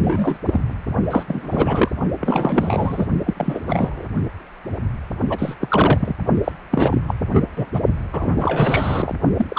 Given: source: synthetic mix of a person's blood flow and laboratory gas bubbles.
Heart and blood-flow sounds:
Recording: Doppler ultrasound of blood flow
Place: precordium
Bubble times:
0.02-0.38 s: bubbles
0.46-0.61 s: bubbles
1.10-1.25 s: bubbles
1.27-1.92 s: bubbles
2.20-3.06 s: bubbles
3.26-3.34 s: bubbles
3.37-3.60 s: bubbles
3.67-4.07 s: bubbles
5.29-5.54 s: bubbles
5.60-6.15 s: bubbles
6.44-6.52 s: bubbles
6.71-6.99 s: bubbles
7.07-7.14 s: bubbles
7.33-7.43 s: bubbles
7.56-7.66 s: bubbles
7.73-7.80 s: bubbles
8.12-9.15 s: bubbles
9.36-9.58 s: bubbles
From the record:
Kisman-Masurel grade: 333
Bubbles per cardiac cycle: rolling drumbeat, 9 or more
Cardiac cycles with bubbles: 50 to 99%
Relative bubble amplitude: loud (0.450 to 0.775)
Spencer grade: 3 (all of the cardiac periods contain showers or single bubble signals, but not dominating or overriding the cardiac motion signals)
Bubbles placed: only in the low amplitude regions of the cardiac cycle

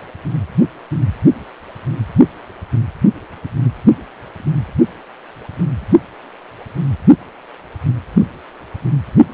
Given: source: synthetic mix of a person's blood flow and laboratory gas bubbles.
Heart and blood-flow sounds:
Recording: Doppler ultrasound of blood flow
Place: precordium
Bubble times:
no bubbles
From the record:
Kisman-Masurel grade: 000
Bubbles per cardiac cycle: 0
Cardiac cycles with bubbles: 0%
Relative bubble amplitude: no bubbles discernible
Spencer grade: 0 (complete lack of bubble signals)

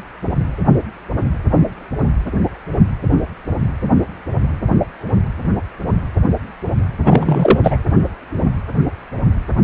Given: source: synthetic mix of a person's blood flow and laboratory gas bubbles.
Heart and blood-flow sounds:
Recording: Doppler ultrasound of blood flow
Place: precordium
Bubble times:
7.05-7.59 s: bubbles
7.63-7.78 s: bubbles
From the record:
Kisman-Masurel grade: 213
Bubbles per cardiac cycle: several, 3 to 8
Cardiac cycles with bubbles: 1 to 10%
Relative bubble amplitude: loud (0.450 to 0.775)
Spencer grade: 1 (occasional bubble signal discernible with the cardiac motion signal, with majority of cardiac periods free of bubbles)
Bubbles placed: anywhere in the cardiac cycle

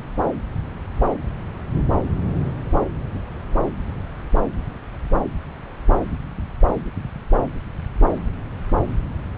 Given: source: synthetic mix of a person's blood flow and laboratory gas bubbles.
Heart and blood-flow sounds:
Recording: Doppler ultrasound of blood flow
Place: subclavian vein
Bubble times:
no bubbles
From the record:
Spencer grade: 0 (complete lack of bubble signals)

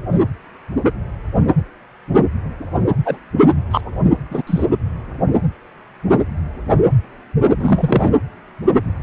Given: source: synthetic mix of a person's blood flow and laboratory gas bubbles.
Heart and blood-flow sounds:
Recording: Doppler ultrasound of blood flow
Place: precordium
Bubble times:
3.05-3.17 s: bubbles
3.71-3.81 s: bubbles
4.30-4.42 s: bubbles
4.46-4.66 s: bubbles
7.59-8.11 s: bubbles
From the record:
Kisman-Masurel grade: 123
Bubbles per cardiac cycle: 1 to 2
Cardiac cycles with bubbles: 10 to 50%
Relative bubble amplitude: loud (0.450 to 0.775)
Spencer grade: 2 (many but less than half of the cardiac periods contain bubble signals, singularly or in groups)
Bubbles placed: anywhere in the cardiac cycle

